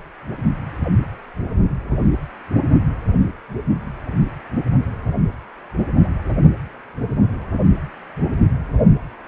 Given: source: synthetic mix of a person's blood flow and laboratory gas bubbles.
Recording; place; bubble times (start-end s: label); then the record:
Doppler ultrasound of blood flow; precordium
no bubbles
From the record:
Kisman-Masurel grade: 000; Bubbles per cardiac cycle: 0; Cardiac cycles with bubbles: 0%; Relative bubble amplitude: no bubbles discernible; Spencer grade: 0 (complete lack of bubble signals)